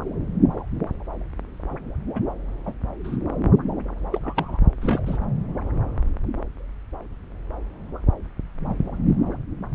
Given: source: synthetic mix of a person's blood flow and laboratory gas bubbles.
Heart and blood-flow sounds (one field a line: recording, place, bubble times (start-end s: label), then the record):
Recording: Doppler ultrasound of blood flow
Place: subclavian vein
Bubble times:
2.15-2.21 s: bubbles
2.65-2.73 s: bubbles
3.04-3.17 s: bubbles
4.12-4.20 s: bubbles
4.23-4.59 s: bubbles
4.81-5.00 s: bubbles
5.05-5.17 s: bubbles
From the record:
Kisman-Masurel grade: 221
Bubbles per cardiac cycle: several, 3 to 8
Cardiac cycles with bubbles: 10 to 50%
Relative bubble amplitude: barely perceptible (0.100 to 0.250)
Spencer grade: 2 (many but less than half of the cardiac periods contain bubble signals, singularly or in groups)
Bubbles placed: anywhere in the cardiac cycle